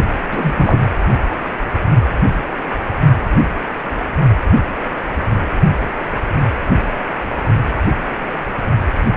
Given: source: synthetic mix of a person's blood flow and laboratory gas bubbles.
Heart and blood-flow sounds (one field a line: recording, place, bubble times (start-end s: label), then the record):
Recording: Doppler ultrasound of blood flow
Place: precordium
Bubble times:
0.31-0.80 s: bubbles
From the record:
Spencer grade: 1 (occasional bubble signal discernible with the cardiac motion signal, with majority of cardiac periods free of bubbles)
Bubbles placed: only in the low amplitude regions of the cardiac cycle